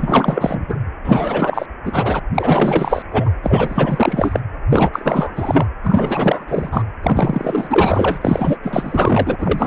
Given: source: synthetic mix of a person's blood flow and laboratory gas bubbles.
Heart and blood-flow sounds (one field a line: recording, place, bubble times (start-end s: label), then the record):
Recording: Doppler ultrasound of blood flow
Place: precordium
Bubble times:
0.00-0.79 s: bubbles
1.03-1.66 s: bubbles
1.84-2.19 s: bubbles
2.34-3.02 s: bubbles
3.11-3.31 s: bubbles
3.43-4.40 s: bubbles
4.70-4.90 s: bubbles
4.93-5.66 s: bubbles
5.83-6.45 s: bubbles
6.48-6.83 s: bubbles
7.03-8.58 s: bubbles
8.62-9.67 s: bubbles
From the record:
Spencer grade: 4 (maximum detectable bubble signal sounding continuously throughout systole and diastole of every cardiac period, and overriding the amplitude of the normal cardiac signals)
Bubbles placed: anywhere in the cardiac cycle